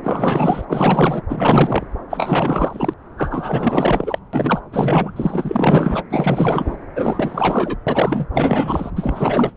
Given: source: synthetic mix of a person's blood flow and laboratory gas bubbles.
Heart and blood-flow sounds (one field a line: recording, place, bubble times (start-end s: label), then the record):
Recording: Doppler ultrasound of blood flow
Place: subclavian vein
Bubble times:
0.04-0.66 s: bubbles
0.69-1.23 s: bubbles
1.28-1.84 s: bubbles
2.09-2.94 s: bubbles
3.17-4.18 s: bubbles
4.33-4.60 s: bubbles
4.72-5.12 s: bubbles
5.16-6.03 s: bubbles
6.10-6.76 s: bubbles
6.95-7.77 s: bubbles
7.86-8.27 s: bubbles
8.33-8.91 s: bubbles
8.96-9.53 s: bubbles
From the record:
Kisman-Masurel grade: 444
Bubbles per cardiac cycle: continuous sound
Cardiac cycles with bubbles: 100%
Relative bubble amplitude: maximal (0.775 to 0.999)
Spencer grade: 4 (maximum detectable bubble signal sounding continuously throughout systole and diastole of every cardiac period, and overriding the amplitude of the normal cardiac signals)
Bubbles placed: anywhere in the cardiac cycle